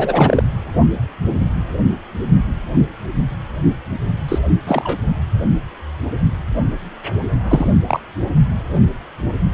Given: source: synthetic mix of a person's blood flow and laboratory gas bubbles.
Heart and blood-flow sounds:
Doppler ultrasound of blood flow; precordium
0.00-0.43 s: bubbles
4.28-4.38 s: bubbles
4.67-4.97 s: bubbles
7.48-7.69 s: bubbles
7.88-8.00 s: bubbles
From the record:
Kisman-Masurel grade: 223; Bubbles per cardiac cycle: several, 3 to 8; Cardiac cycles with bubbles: 10 to 50%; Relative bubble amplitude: loud (0.450 to 0.775); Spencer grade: 2 (many but less than half of the cardiac periods contain bubble signals, singularly or in groups); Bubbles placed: only in the low amplitude regions of the cardiac cycle

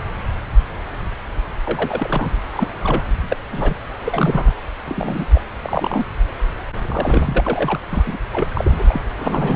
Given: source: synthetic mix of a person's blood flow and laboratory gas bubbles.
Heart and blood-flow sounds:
Doppler ultrasound of blood flow; subclavian vein
1.66-2.32 s: bubbles
2.53-2.68 s: bubbles
2.83-3.02 s: bubbles
3.28-3.37 s: bubbles
3.51-3.76 s: bubbles
4.04-4.52 s: bubbles
4.85-5.42 s: bubbles
5.62-6.06 s: bubbles
6.83-7.40 s: bubbles
7.44-7.79 s: bubbles
7.90-8.18 s: bubbles
8.32-9.02 s: bubbles
9.17-9.56 s: bubbles
From the record:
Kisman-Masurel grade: 232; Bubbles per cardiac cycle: several, 3 to 8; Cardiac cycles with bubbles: 50 to 99%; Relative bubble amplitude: moderate (0.250 to 0.450); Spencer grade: 3 (all of the cardiac periods contain showers or single bubble signals, but not dominating or overriding the cardiac motion signals); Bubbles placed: anywhere in the cardiac cycle

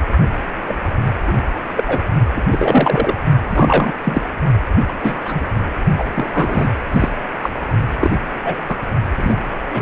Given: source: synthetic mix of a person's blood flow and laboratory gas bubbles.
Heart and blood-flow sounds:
Doppler ultrasound of blood flow; precordium
0.68-0.77 s: bubbles
1.27-1.33 s: bubbles
1.76-1.84 s: bubbles
1.88-2.01 s: bubbles
2.36-2.42 s: bubbles
2.51-3.15 s: bubbles
3.49-3.93 s: bubbles
4.04-4.22 s: bubbles
4.88-4.93 s: bubbles
5.01-5.47 s: bubbles
5.97-6.04 s: bubbles
6.14-6.70 s: bubbles
6.92-7.09 s: bubbles
7.42-7.50 s: bubbles
8.01-8.18 s: bubbles
8.44-8.56 s: bubbles
8.68-8.76 s: bubbles
9.16-9.42 s: bubbles
9.70-9.82 s: bubbles
From the record:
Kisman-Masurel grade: 243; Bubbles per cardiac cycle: several, 3 to 8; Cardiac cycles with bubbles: 100%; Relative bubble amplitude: loud (0.450 to 0.775); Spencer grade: 3 (all of the cardiac periods contain showers or single bubble signals, but not dominating or overriding the cardiac motion signals); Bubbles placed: only in the low amplitude regions of the cardiac cycle

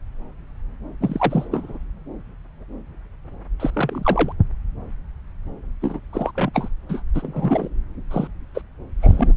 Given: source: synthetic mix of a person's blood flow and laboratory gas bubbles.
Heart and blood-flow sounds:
Doppler ultrasound of blood flow; subclavian vein
1.01-1.46 s: bubbles
1.51-1.78 s: bubbles
3.59-3.71 s: bubbles
3.73-4.33 s: bubbles
5.81-6.00 s: bubbles
6.12-6.31 s: bubbles
6.35-6.50 s: bubbles
6.54-6.68 s: bubbles
6.88-7.02 s: bubbles
7.14-7.69 s: bubbles
8.11-8.28 s: bubbles
8.54-8.62 s: bubbles
9.01-9.33 s: bubbles
From the record:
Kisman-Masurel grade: 232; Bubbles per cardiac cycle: several, 3 to 8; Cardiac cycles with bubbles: 50 to 99%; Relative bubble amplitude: moderate (0.250 to 0.450); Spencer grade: 3 (all of the cardiac periods contain showers or single bubble signals, but not dominating or overriding the cardiac motion signals); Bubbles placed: anywhere in the cardiac cycle

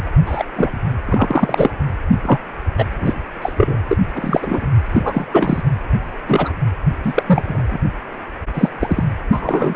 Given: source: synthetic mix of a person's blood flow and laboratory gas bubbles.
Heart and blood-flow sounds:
Doppler ultrasound of blood flow; precordium
0.26-0.45 s: bubbles
0.56-0.80 s: bubbles
1.06-1.71 s: bubbles
2.23-2.38 s: bubbles
2.77-2.85 s: bubbles
3.00-3.13 s: bubbles
3.42-3.52 s: bubbles
3.56-3.77 s: bubbles
3.90-3.98 s: bubbles
4.13-4.67 s: bubbles
4.85-5.25 s: bubbles
5.32-5.62 s: bubbles
6.26-6.53 s: bubbles
7.03-7.23 s: bubbles
7.26-7.79 s: bubbles
8.54-8.70 s: bubbles
8.80-9.04 s: bubbles
9.32-9.76 s: bubbles
From the record:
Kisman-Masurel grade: 243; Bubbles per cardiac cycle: several, 3 to 8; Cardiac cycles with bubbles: 100%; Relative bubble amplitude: loud (0.450 to 0.775); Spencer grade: 3 (all of the cardiac periods contain showers or single bubble signals, but not dominating or overriding the cardiac motion signals); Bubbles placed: anywhere in the cardiac cycle

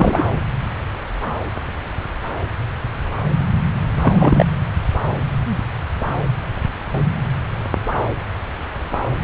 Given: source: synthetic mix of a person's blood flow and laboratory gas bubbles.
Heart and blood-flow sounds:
Doppler ultrasound of blood flow; subclavian vein
0.00-0.22 s: bubbles
4.02-4.13 s: bubbles
4.19-4.46 s: bubbles
From the record:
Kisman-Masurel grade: 223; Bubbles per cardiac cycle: several, 3 to 8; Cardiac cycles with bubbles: 10 to 50%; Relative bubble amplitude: loud (0.450 to 0.775); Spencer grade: 2 (many but less than half of the cardiac periods contain bubble signals, singularly or in groups); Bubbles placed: anywhere in the cardiac cycle

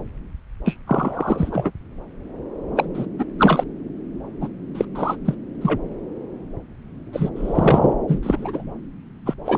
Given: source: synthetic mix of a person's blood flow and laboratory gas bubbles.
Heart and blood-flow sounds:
Doppler ultrasound of blood flow; subclavian vein
0.65-0.76 s: bubbles
0.87-1.71 s: bubbles
2.75-2.85 s: bubbles
2.94-3.06 s: bubbles
3.19-3.25 s: bubbles
3.38-3.64 s: bubbles
4.40-4.48 s: bubbles
4.74-4.85 s: bubbles
4.95-5.17 s: bubbles
5.25-5.34 s: bubbles
5.61-5.81 s: bubbles
7.12-7.30 s: bubbles
7.35-7.92 s: bubbles
8.08-8.19 s: bubbles
8.23-8.64 s: bubbles
9.26-9.34 s: bubbles
9.45-9.58 s: bubbles
From the record:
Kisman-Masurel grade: 233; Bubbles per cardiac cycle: several, 3 to 8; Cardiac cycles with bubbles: 50 to 99%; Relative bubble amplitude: loud (0.450 to 0.775); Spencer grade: 3 (all of the cardiac periods contain showers or single bubble signals, but not dominating or overriding the cardiac motion signals); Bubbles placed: anywhere in the cardiac cycle

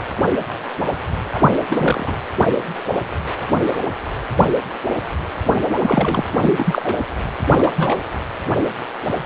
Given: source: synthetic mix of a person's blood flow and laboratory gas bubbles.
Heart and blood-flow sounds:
Doppler ultrasound of blood flow; precordium
0.00-0.05 s: bubbles
1.16-1.50 s: bubbles
1.70-2.12 s: bubbles
5.49-5.54 s: bubbles
5.79-6.25 s: bubbles
6.37-7.02 s: bubbles
7.50-8.04 s: bubbles
From the record:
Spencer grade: 2 (many but less than half of the cardiac periods contain bubble signals, singularly or in groups); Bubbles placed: anywhere in the cardiac cycle

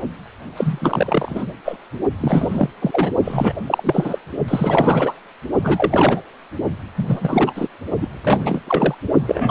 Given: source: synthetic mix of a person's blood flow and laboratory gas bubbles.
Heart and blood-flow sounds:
Doppler ultrasound of blood flow; precordium
0.55-1.46 s: bubbles
1.65-1.77 s: bubbles
2.20-2.68 s: bubbles
2.82-3.11 s: bubbles
3.24-3.53 s: bubbles
3.67-4.18 s: bubbles
4.48-5.13 s: bubbles
5.63-6.23 s: bubbles
6.96-7.53 s: bubbles
7.55-7.68 s: bubbles
8.01-8.08 s: bubbles
8.22-8.61 s: bubbles
8.67-8.95 s: bubbles
9.27-9.50 s: bubbles
From the record:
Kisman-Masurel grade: 333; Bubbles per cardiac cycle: rolling drumbeat, 9 or more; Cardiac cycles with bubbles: 50 to 99%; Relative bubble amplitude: loud (0.450 to 0.775); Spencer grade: 3 (all of the cardiac periods contain showers or single bubble signals, but not dominating or overriding the cardiac motion signals); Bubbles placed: only in the low amplitude regions of the cardiac cycle

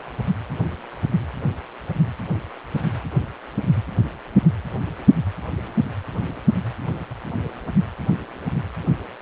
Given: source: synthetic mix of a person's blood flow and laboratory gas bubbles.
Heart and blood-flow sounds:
Doppler ultrasound of blood flow; precordium
no bubbles
From the record:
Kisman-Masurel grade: 000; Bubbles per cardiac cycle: 0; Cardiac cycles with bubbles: 0%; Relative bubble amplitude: no bubbles discernible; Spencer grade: 0 (complete lack of bubble signals)

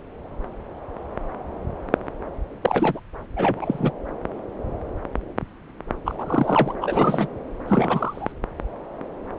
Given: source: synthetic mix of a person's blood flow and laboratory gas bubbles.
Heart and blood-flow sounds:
Doppler ultrasound of blood flow; subclavian vein
2.61-2.99 s: bubbles
3.36-3.92 s: bubbles
6.05-6.74 s: bubbles
6.81-7.27 s: bubbles
7.68-8.32 s: bubbles
From the record:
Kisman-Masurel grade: 222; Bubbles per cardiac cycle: several, 3 to 8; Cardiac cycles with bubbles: 10 to 50%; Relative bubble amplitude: moderate (0.250 to 0.450); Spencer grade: 2 (many but less than half of the cardiac periods contain bubble signals, singularly or in groups); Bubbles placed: anywhere in the cardiac cycle

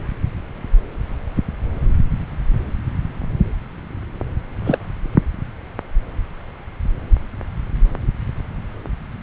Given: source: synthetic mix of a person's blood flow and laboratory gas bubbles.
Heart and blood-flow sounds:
Doppler ultrasound of blood flow; subclavian vein
4.64-4.79 s: bubbles
From the record:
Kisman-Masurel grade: 112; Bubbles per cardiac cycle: 1 to 2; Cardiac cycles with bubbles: 1 to 10%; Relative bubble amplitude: moderate (0.250 to 0.450); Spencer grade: 1 (occasional bubble signal discernible with the cardiac motion signal, with majority of cardiac periods free of bubbles); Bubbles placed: anywhere in the cardiac cycle

